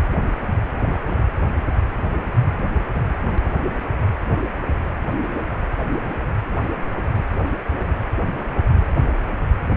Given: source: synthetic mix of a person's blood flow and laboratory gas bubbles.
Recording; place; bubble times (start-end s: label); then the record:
Doppler ultrasound of blood flow; precordium
0.81-1.25 s: bubbles
From the record:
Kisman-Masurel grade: 211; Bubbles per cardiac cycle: several, 3 to 8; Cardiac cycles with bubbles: 1 to 10%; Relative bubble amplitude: barely perceptible (0.100 to 0.250); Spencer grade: 1 (occasional bubble signal discernible with the cardiac motion signal, with majority of cardiac periods free of bubbles); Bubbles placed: anywhere in the cardiac cycle